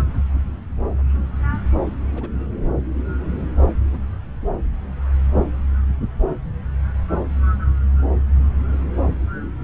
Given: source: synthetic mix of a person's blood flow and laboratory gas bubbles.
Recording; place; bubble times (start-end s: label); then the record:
Doppler ultrasound of blood flow; subclavian vein
2.12-2.29 s: bubbles
3.92-3.98 s: bubbles
4.42-4.47 s: bubbles
From the record:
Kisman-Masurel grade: 121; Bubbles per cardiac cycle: 1 to 2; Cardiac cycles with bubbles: 10 to 50%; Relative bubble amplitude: barely perceptible (0.100 to 0.250); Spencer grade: 2 (many but less than half of the cardiac periods contain bubble signals, singularly or in groups); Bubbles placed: anywhere in the cardiac cycle